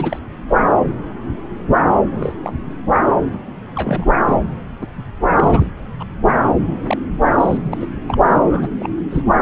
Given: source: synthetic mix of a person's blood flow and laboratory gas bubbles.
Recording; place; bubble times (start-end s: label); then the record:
Doppler ultrasound of blood flow; subclavian vein
0.00-0.19 s: bubbles
2.12-2.34 s: bubbles
2.42-2.53 s: bubbles
3.75-4.06 s: bubbles
4.26-4.39 s: bubbles
4.81-4.87 s: bubbles
5.31-5.70 s: bubbles
6.00-6.04 s: bubbles
6.61-6.97 s: bubbles
7.38-7.77 s: bubbles
7.80-7.86 s: bubbles
8.08-8.18 s: bubbles
8.33-8.69 s: bubbles
8.79-8.90 s: bubbles
9.11-9.22 s: bubbles
From the record:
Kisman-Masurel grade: 232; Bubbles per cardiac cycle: several, 3 to 8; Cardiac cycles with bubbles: 50 to 99%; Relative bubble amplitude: moderate (0.250 to 0.450); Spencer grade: 3 (all of the cardiac periods contain showers or single bubble signals, but not dominating or overriding the cardiac motion signals); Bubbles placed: anywhere in the cardiac cycle